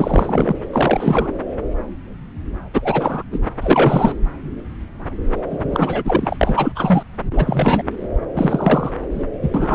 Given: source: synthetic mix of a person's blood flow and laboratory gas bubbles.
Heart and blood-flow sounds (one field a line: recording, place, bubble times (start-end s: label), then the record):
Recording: Doppler ultrasound of blood flow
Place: subclavian vein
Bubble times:
0.00-0.56 s: bubbles
0.72-1.33 s: bubbles
2.73-3.23 s: bubbles
3.32-3.39 s: bubbles
3.61-4.14 s: bubbles
5.50-6.37 s: bubbles
6.41-6.73 s: bubbles
6.75-7.03 s: bubbles
7.33-7.83 s: bubbles
8.34-8.91 s: bubbles
9.15-9.25 s: bubbles
9.42-9.49 s: bubbles
9.54-9.74 s: bubbles
From the record:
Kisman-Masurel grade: 333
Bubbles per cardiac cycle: rolling drumbeat, 9 or more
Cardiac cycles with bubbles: 50 to 99%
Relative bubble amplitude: loud (0.450 to 0.775)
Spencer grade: 3 (all of the cardiac periods contain showers or single bubble signals, but not dominating or overriding the cardiac motion signals)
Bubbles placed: anywhere in the cardiac cycle